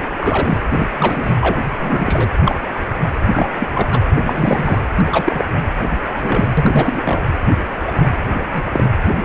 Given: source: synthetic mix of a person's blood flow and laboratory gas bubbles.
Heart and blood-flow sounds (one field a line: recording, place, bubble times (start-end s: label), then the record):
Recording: Doppler ultrasound of blood flow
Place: precordium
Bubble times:
0.17-0.58 s: bubbles
0.69-0.88 s: bubbles
0.98-1.36 s: bubbles
1.41-1.60 s: bubbles
1.79-2.31 s: bubbles
2.44-2.58 s: bubbles
2.75-2.79 s: bubbles
3.30-3.67 s: bubbles
3.74-3.88 s: bubbles
3.92-4.02 s: bubbles
4.26-4.81 s: bubbles
4.96-5.44 s: bubbles
6.10-6.53 s: bubbles
6.57-7.01 s: bubbles
7.05-7.20 s: bubbles
7.87-8.10 s: bubbles
8.54-8.63 s: bubbles
8.72-8.87 s: bubbles
From the record:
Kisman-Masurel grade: 243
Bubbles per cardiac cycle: several, 3 to 8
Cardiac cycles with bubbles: 100%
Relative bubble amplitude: loud (0.450 to 0.775)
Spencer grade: 3 (all of the cardiac periods contain showers or single bubble signals, but not dominating or overriding the cardiac motion signals)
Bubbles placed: anywhere in the cardiac cycle